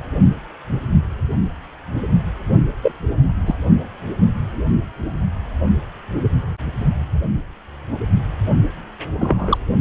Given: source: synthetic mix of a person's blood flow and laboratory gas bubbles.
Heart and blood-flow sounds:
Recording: Doppler ultrasound of blood flow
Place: precordium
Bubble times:
2.82-2.92 s: bubbles
3.46-3.55 s: bubbles
9.18-9.58 s: bubbles
From the record:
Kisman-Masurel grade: 123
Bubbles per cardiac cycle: 1 to 2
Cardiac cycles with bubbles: 10 to 50%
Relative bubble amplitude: loud (0.450 to 0.775)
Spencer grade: 2 (many but less than half of the cardiac periods contain bubble signals, singularly or in groups)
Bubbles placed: only in the low amplitude regions of the cardiac cycle

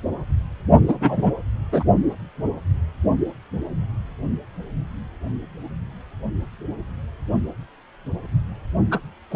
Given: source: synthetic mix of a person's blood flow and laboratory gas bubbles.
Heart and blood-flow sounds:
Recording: Doppler ultrasound of blood flow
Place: precordium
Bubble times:
0.87-0.98 s: bubbles
1.00-1.33 s: bubbles
1.72-1.83 s: bubbles
8.91-8.98 s: bubbles
9.30-9.36 s: bubbles
From the record:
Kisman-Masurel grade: 223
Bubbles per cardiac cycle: several, 3 to 8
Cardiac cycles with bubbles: 10 to 50%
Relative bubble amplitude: loud (0.450 to 0.775)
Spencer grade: 2 (many but less than half of the cardiac periods contain bubble signals, singularly or in groups)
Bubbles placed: only in the low amplitude regions of the cardiac cycle

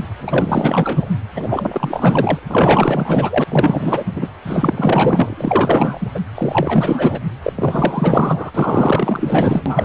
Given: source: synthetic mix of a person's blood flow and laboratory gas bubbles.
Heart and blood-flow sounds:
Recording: Doppler ultrasound of blood flow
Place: precordium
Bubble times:
0.20-1.09 s: bubbles
1.35-2.39 s: bubbles
2.49-3.44 s: bubbles
3.50-4.04 s: bubbles
4.16-4.29 s: bubbles
4.46-6.20 s: bubbles
6.35-7.20 s: bubbles
7.43-7.53 s: bubbles
7.55-8.51 s: bubbles
8.54-9.85 s: bubbles
From the record:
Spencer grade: 4 (maximum detectable bubble signal sounding continuously throughout systole and diastole of every cardiac period, and overriding the amplitude of the normal cardiac signals)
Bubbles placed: anywhere in the cardiac cycle

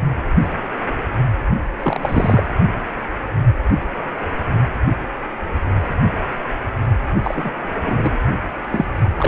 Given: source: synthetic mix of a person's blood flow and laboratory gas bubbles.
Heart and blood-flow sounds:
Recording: Doppler ultrasound of blood flow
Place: precordium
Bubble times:
1.82-2.44 s: bubbles
7.22-7.52 s: bubbles
7.84-8.19 s: bubbles
8.71-8.86 s: bubbles
9.17-9.28 s: bubbles
From the record:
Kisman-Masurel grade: 223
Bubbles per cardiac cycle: several, 3 to 8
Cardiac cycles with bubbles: 10 to 50%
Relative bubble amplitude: loud (0.450 to 0.775)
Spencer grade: 2 (many but less than half of the cardiac periods contain bubble signals, singularly or in groups)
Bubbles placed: only in the low amplitude regions of the cardiac cycle

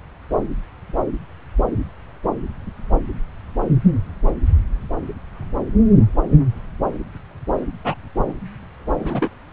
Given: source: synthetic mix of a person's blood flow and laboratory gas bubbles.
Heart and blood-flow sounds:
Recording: Doppler ultrasound of blood flow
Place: subclavian vein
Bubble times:
7.84-7.94 s: bubbles
9.02-9.28 s: bubbles
From the record:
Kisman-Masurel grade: 112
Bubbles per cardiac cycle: 1 to 2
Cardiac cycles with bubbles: 1 to 10%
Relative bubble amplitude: moderate (0.250 to 0.450)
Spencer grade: 1 (occasional bubble signal discernible with the cardiac motion signal, with majority of cardiac periods free of bubbles)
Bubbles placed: anywhere in the cardiac cycle

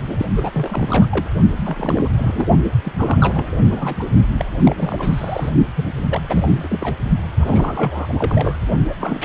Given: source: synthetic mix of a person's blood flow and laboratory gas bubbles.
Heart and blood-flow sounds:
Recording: Doppler ultrasound of blood flow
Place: precordium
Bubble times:
0.03-0.26 s: bubbles
0.36-1.06 s: bubbles
1.11-1.28 s: bubbles
1.56-2.09 s: bubbles
2.17-2.48 s: bubbles
2.83-2.92 s: bubbles
2.96-3.46 s: bubbles
3.59-3.95 s: bubbles
3.99-4.05 s: bubbles
4.37-4.45 s: bubbles
4.64-5.56 s: bubbles
5.76-5.86 s: bubbles
6.05-6.95 s: bubbles
7.40-8.13 s: bubbles
8.16-8.57 s: bubbles
8.88-8.94 s: bubbles
9.00-9.25 s: bubbles
From the record:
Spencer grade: 3 (all of the cardiac periods contain showers or single bubble signals, but not dominating or overriding the cardiac motion signals)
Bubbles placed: only in the low amplitude regions of the cardiac cycle

